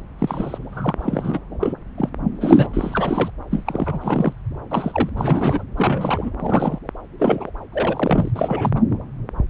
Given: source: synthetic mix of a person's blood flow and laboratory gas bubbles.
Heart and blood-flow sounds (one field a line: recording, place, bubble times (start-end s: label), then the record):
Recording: Doppler ultrasound of blood flow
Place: subclavian vein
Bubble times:
0.18-0.58 s: bubbles
0.73-0.94 s: bubbles
0.99-1.40 s: bubbles
1.60-1.73 s: bubbles
1.97-2.09 s: bubbles
2.40-2.67 s: bubbles
2.73-3.30 s: bubbles
3.50-4.33 s: bubbles
4.71-5.10 s: bubbles
5.16-5.64 s: bubbles
5.77-6.31 s: bubbles
6.39-6.79 s: bubbles
7.19-7.50 s: bubbles
7.72-8.30 s: bubbles
8.36-8.70 s: bubbles
8.75-8.81 s: bubbles
From the record:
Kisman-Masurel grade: 242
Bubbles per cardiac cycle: several, 3 to 8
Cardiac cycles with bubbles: 100%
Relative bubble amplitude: moderate (0.250 to 0.450)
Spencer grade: 3 (all of the cardiac periods contain showers or single bubble signals, but not dominating or overriding the cardiac motion signals)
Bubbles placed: anywhere in the cardiac cycle